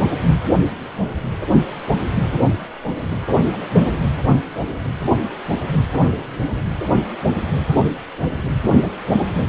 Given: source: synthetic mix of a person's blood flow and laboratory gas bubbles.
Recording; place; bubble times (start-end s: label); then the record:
Doppler ultrasound of blood flow; precordium
3.38-3.57 s: bubbles
3.61-3.67 s: bubbles
3.70-4.01 s: bubbles
From the record:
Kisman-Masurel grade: 211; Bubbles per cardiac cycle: several, 3 to 8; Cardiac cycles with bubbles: 1 to 10%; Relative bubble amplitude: barely perceptible (0.100 to 0.250); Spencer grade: 1 (occasional bubble signal discernible with the cardiac motion signal, with majority of cardiac periods free of bubbles); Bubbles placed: anywhere in the cardiac cycle